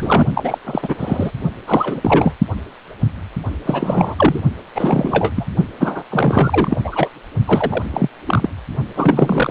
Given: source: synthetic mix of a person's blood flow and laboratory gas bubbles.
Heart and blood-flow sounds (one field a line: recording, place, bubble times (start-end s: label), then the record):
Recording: Doppler ultrasound of blood flow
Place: precordium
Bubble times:
0.00-0.26 s: bubbles
0.33-0.58 s: bubbles
0.64-0.95 s: bubbles
0.99-1.31 s: bubbles
1.67-2.34 s: bubbles
3.65-4.40 s: bubbles
4.75-5.31 s: bubbles
5.36-5.46 s: bubbles
5.79-6.03 s: bubbles
6.11-6.81 s: bubbles
6.83-7.08 s: bubbles
7.46-7.83 s: bubbles
7.92-8.08 s: bubbles
8.25-8.49 s: bubbles
8.96-9.51 s: bubbles
From the record:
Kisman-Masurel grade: 333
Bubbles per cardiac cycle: rolling drumbeat, 9 or more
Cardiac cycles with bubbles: 50 to 99%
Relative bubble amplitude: loud (0.450 to 0.775)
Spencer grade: 3 (all of the cardiac periods contain showers or single bubble signals, but not dominating or overriding the cardiac motion signals)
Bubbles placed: only in the low amplitude regions of the cardiac cycle